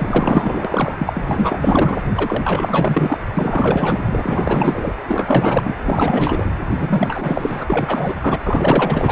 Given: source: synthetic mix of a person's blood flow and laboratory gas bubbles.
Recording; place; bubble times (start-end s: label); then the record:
Doppler ultrasound of blood flow; precordium
0.00-0.95 s: bubbles
0.99-2.00 s: bubbles
2.15-3.19 s: bubbles
3.36-4.94 s: bubbles
5.08-5.75 s: bubbles
5.83-6.51 s: bubbles
6.75-7.64 s: bubbles
7.67-8.17 s: bubbles
8.21-9.11 s: bubbles
From the record:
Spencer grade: 4 (maximum detectable bubble signal sounding continuously throughout systole and diastole of every cardiac period, and overriding the amplitude of the normal cardiac signals); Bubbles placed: anywhere in the cardiac cycle